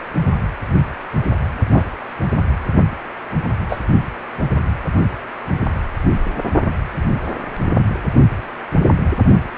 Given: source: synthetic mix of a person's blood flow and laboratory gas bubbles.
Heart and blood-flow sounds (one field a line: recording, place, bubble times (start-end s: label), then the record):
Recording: Doppler ultrasound of blood flow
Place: precordium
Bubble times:
1.72-1.88 s: bubbles
3.69-3.79 s: bubbles
From the record:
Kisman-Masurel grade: 123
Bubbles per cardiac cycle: 1 to 2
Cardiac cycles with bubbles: 10 to 50%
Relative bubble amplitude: loud (0.450 to 0.775)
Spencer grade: 2 (many but less than half of the cardiac periods contain bubble signals, singularly or in groups)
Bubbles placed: only in the low amplitude regions of the cardiac cycle